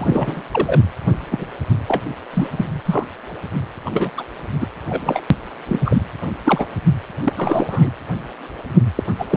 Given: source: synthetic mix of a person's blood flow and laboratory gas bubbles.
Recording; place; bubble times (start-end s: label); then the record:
Doppler ultrasound of blood flow; precordium
0.00-0.42 s: bubbles
0.51-0.81 s: bubbles
1.31-1.47 s: bubbles
1.87-2.03 s: bubbles
2.33-2.48 s: bubbles
2.51-2.65 s: bubbles
2.67-2.81 s: bubbles
2.85-3.08 s: bubbles
3.85-4.10 s: bubbles
4.17-4.23 s: bubbles
4.60-4.68 s: bubbles
4.89-5.21 s: bubbles
5.68-5.79 s: bubbles
5.85-6.02 s: bubbles
6.45-6.66 s: bubbles
7.23-7.89 s: bubbles
8.96-9.03 s: bubbles
9.19-9.28 s: bubbles
9.30-9.37 s: bubbles
From the record:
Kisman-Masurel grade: 233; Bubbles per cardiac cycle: several, 3 to 8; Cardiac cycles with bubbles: 50 to 99%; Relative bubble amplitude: loud (0.450 to 0.775); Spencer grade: 3 (all of the cardiac periods contain showers or single bubble signals, but not dominating or overriding the cardiac motion signals); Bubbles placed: anywhere in the cardiac cycle